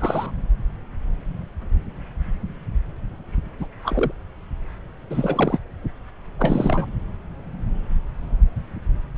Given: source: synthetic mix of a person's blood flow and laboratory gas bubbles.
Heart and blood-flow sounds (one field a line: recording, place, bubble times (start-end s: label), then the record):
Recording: Doppler ultrasound of blood flow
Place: subclavian vein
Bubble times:
0.00-0.31 s: bubbles
3.59-3.66 s: bubbles
3.83-4.12 s: bubbles
5.10-5.58 s: bubbles
6.39-6.86 s: bubbles
From the record:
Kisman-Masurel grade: 222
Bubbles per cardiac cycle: several, 3 to 8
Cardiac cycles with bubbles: 10 to 50%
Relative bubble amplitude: moderate (0.250 to 0.450)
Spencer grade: 2 (many but less than half of the cardiac periods contain bubble signals, singularly or in groups)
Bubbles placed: anywhere in the cardiac cycle